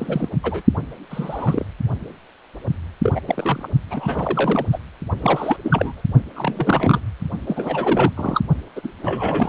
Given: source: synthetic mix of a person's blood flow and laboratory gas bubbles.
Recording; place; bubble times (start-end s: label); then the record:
Doppler ultrasound of blood flow; precordium
0.00-0.29 s: bubbles
0.43-0.62 s: bubbles
1.10-1.66 s: bubbles
3.03-3.20 s: bubbles
3.27-3.69 s: bubbles
3.90-4.66 s: bubbles
4.72-4.79 s: bubbles
5.21-5.57 s: bubbles
5.63-6.03 s: bubbles
6.36-7.01 s: bubbles
7.47-8.12 s: bubbles
8.16-8.41 s: bubbles
8.75-8.81 s: bubbles
8.83-8.88 s: bubbles
9.03-9.49 s: bubbles
From the record:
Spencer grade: 3 (all of the cardiac periods contain showers or single bubble signals, but not dominating or overriding the cardiac motion signals); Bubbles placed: only in the low amplitude regions of the cardiac cycle